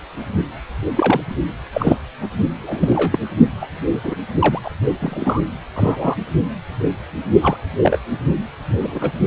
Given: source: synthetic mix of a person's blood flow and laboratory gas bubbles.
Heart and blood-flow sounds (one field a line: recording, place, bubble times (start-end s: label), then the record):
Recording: Doppler ultrasound of blood flow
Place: precordium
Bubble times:
0.96-1.21 s: bubbles
1.72-1.97 s: bubbles
2.22-2.29 s: bubbles
2.63-3.19 s: bubbles
3.61-3.66 s: bubbles
4.03-4.15 s: bubbles
4.39-4.59 s: bubbles
4.62-4.71 s: bubbles
5.00-5.48 s: bubbles
5.75-6.15 s: bubbles
7.41-7.57 s: bubbles
7.82-7.98 s: bubbles
8.77-9.11 s: bubbles
From the record:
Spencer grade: 3 (all of the cardiac periods contain showers or single bubble signals, but not dominating or overriding the cardiac motion signals)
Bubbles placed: only in the low amplitude regions of the cardiac cycle